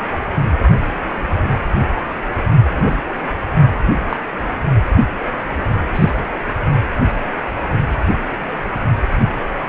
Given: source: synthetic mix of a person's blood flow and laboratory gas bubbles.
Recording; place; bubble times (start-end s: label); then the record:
Doppler ultrasound of blood flow; precordium
2.75-3.02 s: bubbles
4.09-4.17 s: bubbles
5.95-6.11 s: bubbles
From the record:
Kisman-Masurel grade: 122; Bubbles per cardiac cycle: 1 to 2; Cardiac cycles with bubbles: 10 to 50%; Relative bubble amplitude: moderate (0.250 to 0.450); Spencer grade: 2 (many but less than half of the cardiac periods contain bubble signals, singularly or in groups); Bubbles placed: anywhere in the cardiac cycle